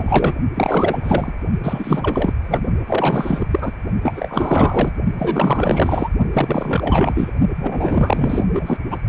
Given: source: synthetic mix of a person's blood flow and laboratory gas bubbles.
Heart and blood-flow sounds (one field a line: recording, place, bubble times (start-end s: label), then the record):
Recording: Doppler ultrasound of blood flow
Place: precordium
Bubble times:
0.00-0.34 s: bubbles
0.54-1.33 s: bubbles
1.63-2.33 s: bubbles
2.44-2.67 s: bubbles
2.87-3.47 s: bubbles
3.51-3.72 s: bubbles
4.01-4.91 s: bubbles
5.17-6.09 s: bubbles
6.33-7.32 s: bubbles
7.58-8.46 s: bubbles
8.53-8.77 s: bubbles
8.90-9.01 s: bubbles
From the record:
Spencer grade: 4 (maximum detectable bubble signal sounding continuously throughout systole and diastole of every cardiac period, and overriding the amplitude of the normal cardiac signals)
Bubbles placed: only in the low amplitude regions of the cardiac cycle